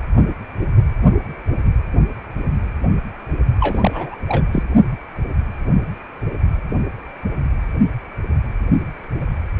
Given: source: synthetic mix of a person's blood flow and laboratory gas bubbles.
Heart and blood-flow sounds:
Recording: Doppler ultrasound of blood flow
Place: precordium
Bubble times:
3.60-4.19 s: bubbles
4.28-4.44 s: bubbles
4.52-4.63 s: bubbles
From the record:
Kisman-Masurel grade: 212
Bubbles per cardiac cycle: several, 3 to 8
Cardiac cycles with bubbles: 1 to 10%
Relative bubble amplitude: moderate (0.250 to 0.450)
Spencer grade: 1 (occasional bubble signal discernible with the cardiac motion signal, with majority of cardiac periods free of bubbles)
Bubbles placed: only in the low amplitude regions of the cardiac cycle

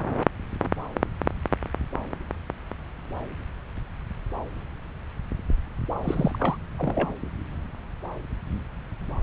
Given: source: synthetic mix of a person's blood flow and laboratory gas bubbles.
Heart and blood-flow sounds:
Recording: Doppler ultrasound of blood flow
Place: subclavian vein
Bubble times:
6.02-6.57 s: bubbles
6.78-7.14 s: bubbles
From the record:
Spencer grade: 1 (occasional bubble signal discernible with the cardiac motion signal, with majority of cardiac periods free of bubbles)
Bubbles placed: anywhere in the cardiac cycle

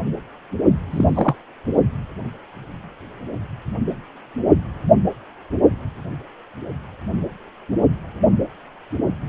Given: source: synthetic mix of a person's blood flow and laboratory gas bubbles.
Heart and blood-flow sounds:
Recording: Doppler ultrasound of blood flow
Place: precordium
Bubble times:
0.91-1.36 s: bubbles
From the record:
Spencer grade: 1 (occasional bubble signal discernible with the cardiac motion signal, with majority of cardiac periods free of bubbles)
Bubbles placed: only in the low amplitude regions of the cardiac cycle

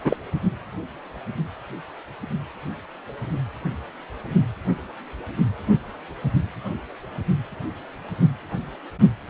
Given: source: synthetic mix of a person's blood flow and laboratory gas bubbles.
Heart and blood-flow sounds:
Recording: Doppler ultrasound of blood flow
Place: precordium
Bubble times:
0.04-0.17 s: bubbles
From the record:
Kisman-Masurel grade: 212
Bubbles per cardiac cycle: several, 3 to 8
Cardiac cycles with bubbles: 1 to 10%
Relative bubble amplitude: moderate (0.250 to 0.450)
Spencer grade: 1 (occasional bubble signal discernible with the cardiac motion signal, with majority of cardiac periods free of bubbles)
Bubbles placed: only in the low amplitude regions of the cardiac cycle

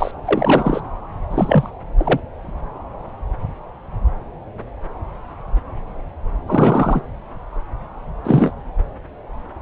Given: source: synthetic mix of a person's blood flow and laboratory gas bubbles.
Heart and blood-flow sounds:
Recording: Doppler ultrasound of blood flow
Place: subclavian vein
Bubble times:
0.00-0.11 s: bubbles
0.25-0.81 s: bubbles
1.30-1.70 s: bubbles
1.97-2.20 s: bubbles
6.47-7.01 s: bubbles
8.24-8.51 s: bubbles
From the record:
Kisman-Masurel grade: 223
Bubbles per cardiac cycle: several, 3 to 8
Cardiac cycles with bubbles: 10 to 50%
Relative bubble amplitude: loud (0.450 to 0.775)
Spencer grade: 2 (many but less than half of the cardiac periods contain bubble signals, singularly or in groups)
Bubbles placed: anywhere in the cardiac cycle

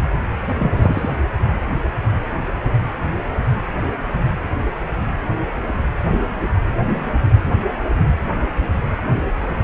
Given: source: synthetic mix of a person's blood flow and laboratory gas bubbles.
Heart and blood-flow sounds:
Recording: Doppler ultrasound of blood flow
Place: precordium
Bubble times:
0.59-1.08 s: bubbles
From the record:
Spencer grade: 2 (many but less than half of the cardiac periods contain bubble signals, singularly or in groups)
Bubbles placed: anywhere in the cardiac cycle

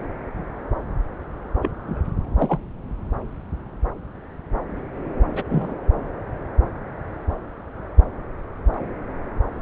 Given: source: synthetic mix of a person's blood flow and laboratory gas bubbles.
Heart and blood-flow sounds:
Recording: Doppler ultrasound of blood flow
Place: subclavian vein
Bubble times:
1.62-1.71 s: bubbles
1.86-2.01 s: bubbles
2.38-2.58 s: bubbles
5.35-5.44 s: bubbles
5.49-5.75 s: bubbles
From the record:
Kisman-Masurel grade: 122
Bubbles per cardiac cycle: 1 to 2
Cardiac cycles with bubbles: 10 to 50%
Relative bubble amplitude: moderate (0.250 to 0.450)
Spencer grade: 2 (many but less than half of the cardiac periods contain bubble signals, singularly or in groups)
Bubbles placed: anywhere in the cardiac cycle

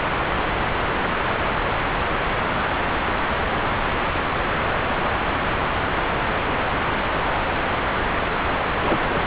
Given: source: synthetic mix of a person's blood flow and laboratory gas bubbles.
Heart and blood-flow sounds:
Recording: Doppler ultrasound of blood flow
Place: subclavian vein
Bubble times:
8.81-9.22 s: bubbles
From the record:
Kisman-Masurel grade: 111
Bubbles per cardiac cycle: 1 to 2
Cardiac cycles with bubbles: 1 to 10%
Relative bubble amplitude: barely perceptible (0.100 to 0.250)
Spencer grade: 1 (occasional bubble signal discernible with the cardiac motion signal, with majority of cardiac periods free of bubbles)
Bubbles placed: anywhere in the cardiac cycle

